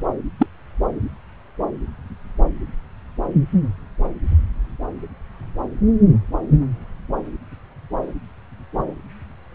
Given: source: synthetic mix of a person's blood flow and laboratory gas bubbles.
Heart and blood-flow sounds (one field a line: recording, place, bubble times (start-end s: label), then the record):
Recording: Doppler ultrasound of blood flow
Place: subclavian vein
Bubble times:
0.39-0.47 s: bubbles
From the record:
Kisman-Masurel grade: 113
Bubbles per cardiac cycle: 1 to 2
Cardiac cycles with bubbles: 1 to 10%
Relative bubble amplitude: loud (0.450 to 0.775)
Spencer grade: 1 (occasional bubble signal discernible with the cardiac motion signal, with majority of cardiac periods free of bubbles)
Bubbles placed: anywhere in the cardiac cycle